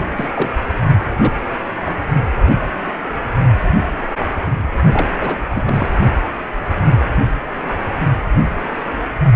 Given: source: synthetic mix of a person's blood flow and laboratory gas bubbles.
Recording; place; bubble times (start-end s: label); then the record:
Doppler ultrasound of blood flow; precordium
0.00-0.08 s: bubbles
0.16-0.29 s: bubbles
0.35-0.50 s: bubbles
1.21-1.32 s: bubbles
1.85-1.97 s: bubbles
2.15-2.20 s: bubbles
4.93-5.08 s: bubbles
5.20-5.38 s: bubbles
5.55-5.88 s: bubbles
From the record:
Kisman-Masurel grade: 222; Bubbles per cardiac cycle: several, 3 to 8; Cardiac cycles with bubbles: 10 to 50%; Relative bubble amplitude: moderate (0.250 to 0.450); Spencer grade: 2 (many but less than half of the cardiac periods contain bubble signals, singularly or in groups); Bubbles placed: anywhere in the cardiac cycle